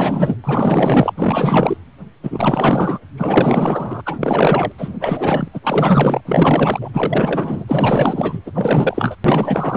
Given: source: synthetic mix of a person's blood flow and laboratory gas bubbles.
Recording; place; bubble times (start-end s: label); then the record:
Doppler ultrasound of blood flow; precordium
0.00-0.38 s: bubbles
0.43-1.12 s: bubbles
1.17-1.77 s: bubbles
2.23-2.98 s: bubbles
3.18-4.01 s: bubbles
4.05-4.72 s: bubbles
4.77-4.93 s: bubbles
5.00-5.48 s: bubbles
5.53-5.60 s: bubbles
5.63-6.21 s: bubbles
6.25-6.89 s: bubbles
6.93-8.39 s: bubbles
8.46-8.51 s: bubbles
8.54-9.15 s: bubbles
9.24-9.77 s: bubbles
From the record:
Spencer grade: 4 (maximum detectable bubble signal sounding continuously throughout systole and diastole of every cardiac period, and overriding the amplitude of the normal cardiac signals); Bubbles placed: anywhere in the cardiac cycle